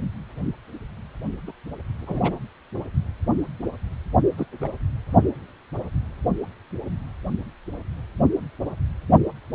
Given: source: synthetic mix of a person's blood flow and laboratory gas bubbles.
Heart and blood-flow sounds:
Doppler ultrasound of blood flow; precordium
1.47-1.52 s: bubbles
2.01-2.35 s: bubbles
4.37-4.46 s: bubbles
4.60-4.68 s: bubbles
From the record:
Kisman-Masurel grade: 121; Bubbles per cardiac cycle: 1 to 2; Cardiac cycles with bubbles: 10 to 50%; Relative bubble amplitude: barely perceptible (0.100 to 0.250); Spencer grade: 2 (many but less than half of the cardiac periods contain bubble signals, singularly or in groups); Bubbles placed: only in the low amplitude regions of the cardiac cycle

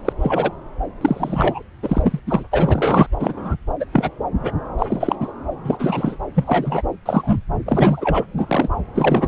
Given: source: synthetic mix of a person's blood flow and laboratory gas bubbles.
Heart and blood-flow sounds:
Doppler ultrasound of blood flow; subclavian vein
0.05-0.12 s: bubbles
0.20-0.53 s: bubbles
1.01-1.63 s: bubbles
1.83-2.20 s: bubbles
2.27-2.44 s: bubbles
2.52-3.06 s: bubbles
3.20-3.56 s: bubbles
3.80-3.85 s: bubbles
3.93-4.09 s: bubbles
4.39-4.51 s: bubbles
4.78-5.15 s: bubbles
5.20-5.31 s: bubbles
5.63-6.17 s: bubbles
6.35-6.82 s: bubbles
7.05-7.39 s: bubbles
7.66-8.24 s: bubbles
8.37-8.68 s: bubbles
8.95-9.28 s: bubbles
From the record:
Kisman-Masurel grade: 243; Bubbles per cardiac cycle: several, 3 to 8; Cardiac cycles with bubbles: 100%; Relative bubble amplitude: loud (0.450 to 0.775); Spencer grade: 3 (all of the cardiac periods contain showers or single bubble signals, but not dominating or overriding the cardiac motion signals); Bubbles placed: anywhere in the cardiac cycle

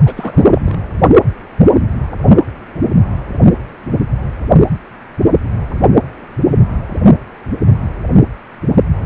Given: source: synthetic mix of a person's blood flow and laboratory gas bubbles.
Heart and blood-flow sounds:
Doppler ultrasound of blood flow; precordium
0.05-0.61 s: bubbles
0.66-0.79 s: bubbles
From the record:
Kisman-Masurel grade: 212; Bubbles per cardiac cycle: several, 3 to 8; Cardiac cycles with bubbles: 1 to 10%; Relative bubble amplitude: moderate (0.250 to 0.450); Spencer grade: 1 (occasional bubble signal discernible with the cardiac motion signal, with majority of cardiac periods free of bubbles); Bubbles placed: only in the low amplitude regions of the cardiac cycle

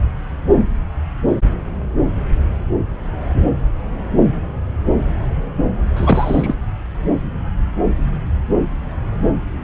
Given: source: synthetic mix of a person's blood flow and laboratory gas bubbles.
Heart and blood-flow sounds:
Doppler ultrasound of blood flow; subclavian vein
5.96-6.54 s: bubbles
From the record:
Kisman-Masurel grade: 223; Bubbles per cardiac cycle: several, 3 to 8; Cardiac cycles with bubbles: 10 to 50%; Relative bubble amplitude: loud (0.450 to 0.775); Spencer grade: 2 (many but less than half of the cardiac periods contain bubble signals, singularly or in groups); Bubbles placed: anywhere in the cardiac cycle

